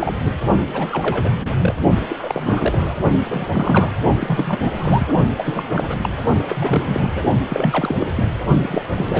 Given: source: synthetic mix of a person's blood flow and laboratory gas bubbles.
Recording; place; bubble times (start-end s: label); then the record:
Doppler ultrasound of blood flow; precordium
0.00-0.19 s: bubbles
0.24-0.35 s: bubbles
0.74-1.52 s: bubbles
1.60-1.74 s: bubbles
2.09-2.95 s: bubbles
3.30-3.48 s: bubbles
3.52-3.96 s: bubbles
4.21-4.60 s: bubbles
4.64-4.73 s: bubbles
4.76-5.08 s: bubbles
5.37-5.63 s: bubbles
5.71-6.09 s: bubbles
6.42-7.10 s: bubbles
7.15-7.23 s: bubbles
7.49-7.96 s: bubbles
7.99-8.08 s: bubbles
8.16-8.40 s: bubbles
8.62-8.82 s: bubbles
8.94-9.20 s: bubbles
From the record:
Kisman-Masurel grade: 342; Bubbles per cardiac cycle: rolling drumbeat, 9 or more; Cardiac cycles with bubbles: 100%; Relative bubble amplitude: moderate (0.250 to 0.450); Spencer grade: 3 (all of the cardiac periods contain showers or single bubble signals, but not dominating or overriding the cardiac motion signals); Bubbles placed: only in the low amplitude regions of the cardiac cycle